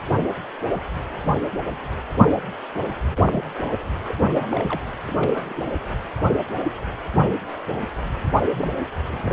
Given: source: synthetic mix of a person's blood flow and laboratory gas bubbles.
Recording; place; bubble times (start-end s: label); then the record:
Doppler ultrasound of blood flow; precordium
3.11-3.48 s: bubbles
3.55-3.72 s: bubbles
4.08-4.15 s: bubbles
4.29-4.82 s: bubbles
5.05-5.54 s: bubbles
5.57-5.62 s: bubbles
8.51-8.79 s: bubbles
9.03-9.33 s: bubbles
From the record:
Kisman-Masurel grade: 221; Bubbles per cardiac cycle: several, 3 to 8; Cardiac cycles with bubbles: 10 to 50%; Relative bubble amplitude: barely perceptible (0.100 to 0.250); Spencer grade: 2 (many but less than half of the cardiac periods contain bubble signals, singularly or in groups); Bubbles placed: anywhere in the cardiac cycle